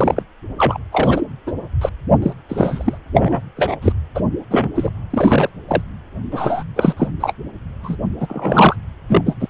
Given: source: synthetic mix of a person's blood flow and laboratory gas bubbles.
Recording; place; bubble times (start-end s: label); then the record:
Doppler ultrasound of blood flow; precordium
0.00-0.22 s: bubbles
0.57-0.78 s: bubbles
0.92-1.21 s: bubbles
1.46-1.52 s: bubbles
1.81-1.89 s: bubbles
2.22-2.33 s: bubbles
2.49-2.98 s: bubbles
3.15-3.42 s: bubbles
3.56-3.77 s: bubbles
3.81-3.92 s: bubbles
4.15-4.21 s: bubbles
4.50-4.69 s: bubbles
4.75-4.90 s: bubbles
5.10-5.49 s: bubbles
5.68-5.82 s: bubbles
6.31-6.63 s: bubbles
6.75-6.94 s: bubbles
6.96-7.08 s: bubbles
7.20-7.33 s: bubbles
7.83-7.96 s: bubbles
8.20-8.76 s: bubbles
9.08-9.21 s: bubbles
9.26-9.33 s: bubbles
9.39-9.48 s: bubbles
From the record:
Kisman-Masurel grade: 243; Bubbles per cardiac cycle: several, 3 to 8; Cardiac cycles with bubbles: 100%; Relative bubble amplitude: loud (0.450 to 0.775); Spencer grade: 3 (all of the cardiac periods contain showers or single bubble signals, but not dominating or overriding the cardiac motion signals); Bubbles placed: anywhere in the cardiac cycle